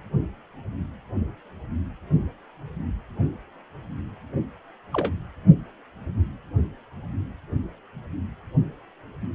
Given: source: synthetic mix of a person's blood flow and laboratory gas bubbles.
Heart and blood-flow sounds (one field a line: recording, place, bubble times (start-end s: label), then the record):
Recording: Doppler ultrasound of blood flow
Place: precordium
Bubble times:
4.93-5.11 s: bubbles
From the record:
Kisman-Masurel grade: 111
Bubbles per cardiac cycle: 1 to 2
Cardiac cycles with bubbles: 1 to 10%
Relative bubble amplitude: barely perceptible (0.100 to 0.250)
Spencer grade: 1 (occasional bubble signal discernible with the cardiac motion signal, with majority of cardiac periods free of bubbles)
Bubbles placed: anywhere in the cardiac cycle